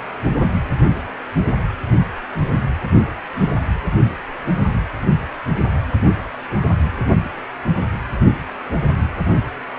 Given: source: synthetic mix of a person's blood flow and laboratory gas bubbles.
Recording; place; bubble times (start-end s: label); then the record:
Doppler ultrasound of blood flow; precordium
3.35-3.54 s: bubbles
From the record:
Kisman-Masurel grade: 113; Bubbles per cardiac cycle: 1 to 2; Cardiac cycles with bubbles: 1 to 10%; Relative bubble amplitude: loud (0.450 to 0.775); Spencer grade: 1 (occasional bubble signal discernible with the cardiac motion signal, with majority of cardiac periods free of bubbles); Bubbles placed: anywhere in the cardiac cycle